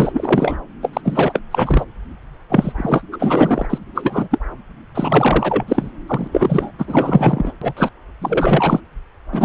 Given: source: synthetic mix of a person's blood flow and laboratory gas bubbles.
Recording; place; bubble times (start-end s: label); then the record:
Doppler ultrasound of blood flow; subclavian vein
0.00-0.57 s: bubbles
0.82-0.90 s: bubbles
0.93-1.01 s: bubbles
1.05-1.40 s: bubbles
1.51-1.85 s: bubbles
2.49-2.73 s: bubbles
2.77-3.03 s: bubbles
3.12-3.66 s: bubbles
3.70-3.78 s: bubbles
3.94-4.28 s: bubbles
4.30-4.38 s: bubbles
4.94-5.64 s: bubbles
5.67-5.91 s: bubbles
6.07-6.27 s: bubbles
6.31-6.71 s: bubbles
6.78-7.52 s: bubbles
7.61-7.73 s: bubbles
7.76-7.90 s: bubbles
8.21-8.80 s: bubbles
9.32-9.45 s: bubbles
From the record:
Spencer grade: 4 (maximum detectable bubble signal sounding continuously throughout systole and diastole of every cardiac period, and overriding the amplitude of the normal cardiac signals); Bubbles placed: anywhere in the cardiac cycle